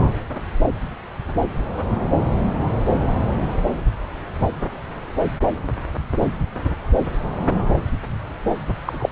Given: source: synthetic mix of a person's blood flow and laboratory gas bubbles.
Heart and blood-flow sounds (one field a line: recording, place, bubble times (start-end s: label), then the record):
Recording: Doppler ultrasound of blood flow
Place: subclavian vein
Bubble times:
8.85-9.09 s: bubbles
From the record:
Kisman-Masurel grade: 213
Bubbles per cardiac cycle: several, 3 to 8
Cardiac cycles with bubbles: 1 to 10%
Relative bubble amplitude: loud (0.450 to 0.775)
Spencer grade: 1 (occasional bubble signal discernible with the cardiac motion signal, with majority of cardiac periods free of bubbles)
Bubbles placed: anywhere in the cardiac cycle